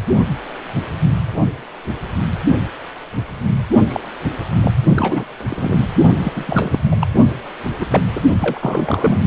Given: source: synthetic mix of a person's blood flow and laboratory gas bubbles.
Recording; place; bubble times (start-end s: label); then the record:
Doppler ultrasound of blood flow; precordium
3.88-4.00 s: bubbles
4.61-4.72 s: bubbles
4.95-5.24 s: bubbles
5.50-5.78 s: bubbles
6.23-6.32 s: bubbles
6.35-6.44 s: bubbles
6.46-6.79 s: bubbles
6.91-6.95 s: bubbles
6.99-7.07 s: bubbles
7.79-7.85 s: bubbles
7.90-8.21 s: bubbles
8.39-9.20 s: bubbles
From the record:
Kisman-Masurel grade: 232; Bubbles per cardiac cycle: several, 3 to 8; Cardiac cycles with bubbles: 50 to 99%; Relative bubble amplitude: moderate (0.250 to 0.450); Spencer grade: 3 (all of the cardiac periods contain showers or single bubble signals, but not dominating or overriding the cardiac motion signals); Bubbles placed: only in the low amplitude regions of the cardiac cycle